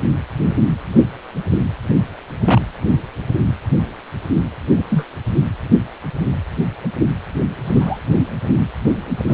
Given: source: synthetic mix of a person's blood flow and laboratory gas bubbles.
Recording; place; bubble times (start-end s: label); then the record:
Doppler ultrasound of blood flow; precordium
2.45-2.61 s: bubbles
4.77-4.84 s: bubbles
4.89-5.04 s: bubbles
7.64-8.01 s: bubbles
9.27-9.34 s: bubbles
From the record:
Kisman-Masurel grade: 122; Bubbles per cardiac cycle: 1 to 2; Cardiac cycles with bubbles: 10 to 50%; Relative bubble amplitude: moderate (0.250 to 0.450); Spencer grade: 2 (many but less than half of the cardiac periods contain bubble signals, singularly or in groups); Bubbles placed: anywhere in the cardiac cycle